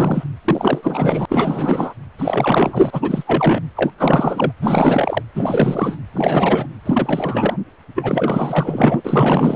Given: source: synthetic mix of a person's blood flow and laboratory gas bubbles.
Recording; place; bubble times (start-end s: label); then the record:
Doppler ultrasound of blood flow; precordium
0.00-0.23 s: bubbles
0.45-1.25 s: bubbles
1.28-1.94 s: bubbles
2.18-3.62 s: bubbles
3.76-3.91 s: bubbles
3.98-4.52 s: bubbles
4.62-5.23 s: bubbles
5.34-5.98 s: bubbles
6.12-6.67 s: bubbles
6.86-7.57 s: bubbles
7.95-9.01 s: bubbles
9.04-9.56 s: bubbles
From the record:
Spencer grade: 4 (maximum detectable bubble signal sounding continuously throughout systole and diastole of every cardiac period, and overriding the amplitude of the normal cardiac signals); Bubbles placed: anywhere in the cardiac cycle